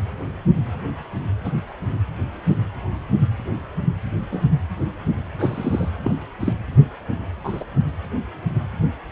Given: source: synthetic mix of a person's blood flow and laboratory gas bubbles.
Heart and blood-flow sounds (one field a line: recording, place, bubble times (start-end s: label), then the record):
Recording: Doppler ultrasound of blood flow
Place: precordium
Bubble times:
1.44-1.53 s: bubbles
4.31-4.47 s: bubbles
5.38-5.89 s: bubbles
6.04-6.11 s: bubbles
6.39-6.53 s: bubbles
7.44-7.63 s: bubbles
From the record:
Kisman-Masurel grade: 122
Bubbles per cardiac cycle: 1 to 2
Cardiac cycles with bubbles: 10 to 50%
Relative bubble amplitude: moderate (0.250 to 0.450)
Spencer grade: 2 (many but less than half of the cardiac periods contain bubble signals, singularly or in groups)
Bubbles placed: anywhere in the cardiac cycle